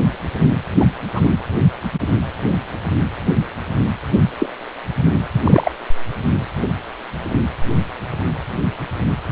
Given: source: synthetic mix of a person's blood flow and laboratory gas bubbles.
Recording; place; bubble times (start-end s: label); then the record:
Doppler ultrasound of blood flow; precordium
0.79-0.85 s: bubbles
1.13-1.21 s: bubbles
4.39-4.47 s: bubbles
5.44-5.71 s: bubbles
From the record:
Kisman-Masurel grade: 123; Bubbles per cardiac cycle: 1 to 2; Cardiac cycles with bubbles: 10 to 50%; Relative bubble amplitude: loud (0.450 to 0.775); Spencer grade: 2 (many but less than half of the cardiac periods contain bubble signals, singularly or in groups); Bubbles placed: anywhere in the cardiac cycle